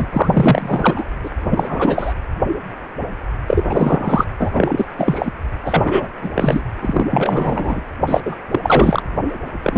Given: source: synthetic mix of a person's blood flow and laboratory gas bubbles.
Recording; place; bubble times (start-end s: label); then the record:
Doppler ultrasound of blood flow; precordium
0.00-0.07 s: bubbles
0.12-1.04 s: bubbles
1.23-1.30 s: bubbles
1.50-2.13 s: bubbles
3.47-3.63 s: bubbles
3.69-4.25 s: bubbles
4.39-4.50 s: bubbles
4.53-4.86 s: bubbles
4.98-5.31 s: bubbles
5.63-6.08 s: bubbles
6.22-6.30 s: bubbles
6.35-6.62 s: bubbles
6.81-7.81 s: bubbles
8.07-8.21 s: bubbles
8.25-8.35 s: bubbles
8.51-8.59 s: bubbles
8.62-9.03 s: bubbles
9.63-9.78 s: bubbles
From the record:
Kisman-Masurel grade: 333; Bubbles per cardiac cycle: rolling drumbeat, 9 or more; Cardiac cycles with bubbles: 50 to 99%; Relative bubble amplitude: loud (0.450 to 0.775); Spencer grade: 3 (all of the cardiac periods contain showers or single bubble signals, but not dominating or overriding the cardiac motion signals); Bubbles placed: anywhere in the cardiac cycle